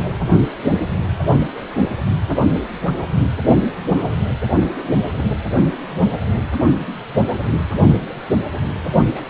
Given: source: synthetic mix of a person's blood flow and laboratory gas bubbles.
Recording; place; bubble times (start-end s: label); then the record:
Doppler ultrasound of blood flow; precordium
5.17-5.25 s: bubbles
5.60-5.66 s: bubbles
9.05-9.21 s: bubbles
From the record:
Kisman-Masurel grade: 121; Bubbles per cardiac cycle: 1 to 2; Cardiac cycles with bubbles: 10 to 50%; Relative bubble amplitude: barely perceptible (0.100 to 0.250); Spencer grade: 2 (many but less than half of the cardiac periods contain bubble signals, singularly or in groups); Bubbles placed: anywhere in the cardiac cycle